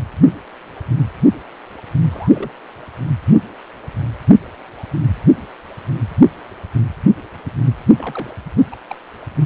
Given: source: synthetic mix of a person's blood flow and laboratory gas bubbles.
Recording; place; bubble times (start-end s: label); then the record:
Doppler ultrasound of blood flow; precordium
2.11-2.31 s: bubbles
2.34-2.51 s: bubbles
7.95-8.38 s: bubbles
8.71-8.76 s: bubbles
8.89-8.95 s: bubbles
From the record:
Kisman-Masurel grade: 121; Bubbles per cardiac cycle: 1 to 2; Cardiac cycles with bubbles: 10 to 50%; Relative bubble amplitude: barely perceptible (0.100 to 0.250); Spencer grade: 2 (many but less than half of the cardiac periods contain bubble signals, singularly or in groups); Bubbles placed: anywhere in the cardiac cycle